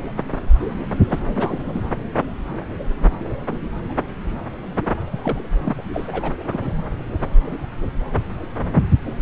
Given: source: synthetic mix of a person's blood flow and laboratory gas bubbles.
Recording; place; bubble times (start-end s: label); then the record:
Doppler ultrasound of blood flow; subclavian vein
1.08-1.80 s: bubbles
5.11-5.19 s: bubbles
5.22-5.40 s: bubbles
5.64-5.85 s: bubbles
5.93-6.36 s: bubbles
6.49-6.71 s: bubbles
From the record:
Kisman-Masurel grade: 221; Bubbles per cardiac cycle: several, 3 to 8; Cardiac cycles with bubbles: 10 to 50%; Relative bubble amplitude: barely perceptible (0.100 to 0.250); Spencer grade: 2 (many but less than half of the cardiac periods contain bubble signals, singularly or in groups); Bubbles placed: anywhere in the cardiac cycle